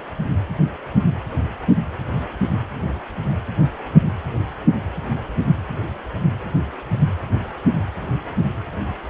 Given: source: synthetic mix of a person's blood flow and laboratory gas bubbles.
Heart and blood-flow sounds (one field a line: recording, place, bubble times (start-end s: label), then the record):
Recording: Doppler ultrasound of blood flow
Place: precordium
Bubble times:
no bubbles
From the record:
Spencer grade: 0 (complete lack of bubble signals)